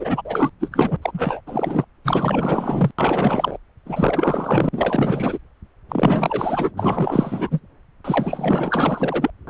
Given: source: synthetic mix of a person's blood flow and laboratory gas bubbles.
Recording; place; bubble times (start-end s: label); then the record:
Doppler ultrasound of blood flow; subclavian vein
0.00-0.22 s: bubbles
0.25-0.50 s: bubbles
0.59-0.69 s: bubbles
0.72-0.97 s: bubbles
1.02-1.41 s: bubbles
1.47-1.85 s: bubbles
2.04-2.91 s: bubbles
2.98-3.57 s: bubbles
3.85-4.69 s: bubbles
4.72-5.38 s: bubbles
5.89-6.71 s: bubbles
6.76-7.60 s: bubbles
8.04-9.30 s: bubbles
9.47-9.50 s: bubbles
From the record:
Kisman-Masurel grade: 444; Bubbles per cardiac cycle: continuous sound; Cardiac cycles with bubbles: 100%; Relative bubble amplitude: maximal (0.775 to 0.999); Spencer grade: 4 (maximum detectable bubble signal sounding continuously throughout systole and diastole of every cardiac period, and overriding the amplitude of the normal cardiac signals); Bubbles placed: anywhere in the cardiac cycle